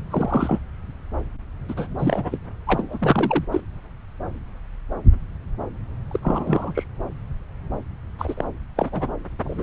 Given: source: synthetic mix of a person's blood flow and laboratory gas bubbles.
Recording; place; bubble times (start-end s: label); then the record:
Doppler ultrasound of blood flow; subclavian vein
0.10-0.59 s: bubbles
1.69-1.88 s: bubbles
1.98-2.38 s: bubbles
2.67-3.45 s: bubbles
3.51-3.62 s: bubbles
6.11-6.20 s: bubbles
6.23-6.84 s: bubbles
8.18-8.48 s: bubbles
8.77-9.08 s: bubbles
9.44-9.63 s: bubbles
From the record:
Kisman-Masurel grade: 232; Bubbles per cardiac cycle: several, 3 to 8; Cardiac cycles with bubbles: 50 to 99%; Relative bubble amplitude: moderate (0.250 to 0.450); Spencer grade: 3 (all of the cardiac periods contain showers or single bubble signals, but not dominating or overriding the cardiac motion signals); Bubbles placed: anywhere in the cardiac cycle